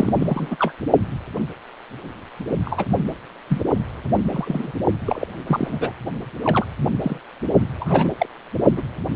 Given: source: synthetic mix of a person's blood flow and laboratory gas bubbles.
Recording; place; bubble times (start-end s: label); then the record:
Doppler ultrasound of blood flow; precordium
0.00-0.13 s: bubbles
0.18-0.56 s: bubbles
0.59-0.73 s: bubbles
2.65-2.85 s: bubbles
3.48-3.62 s: bubbles
4.31-4.71 s: bubbles
5.05-5.28 s: bubbles
5.46-5.92 s: bubbles
6.43-6.66 s: bubbles
7.00-7.20 s: bubbles
7.79-8.09 s: bubbles
8.18-8.26 s: bubbles
8.76-8.82 s: bubbles
From the record:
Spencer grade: 3 (all of the cardiac periods contain showers or single bubble signals, but not dominating or overriding the cardiac motion signals); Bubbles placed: only in the low amplitude regions of the cardiac cycle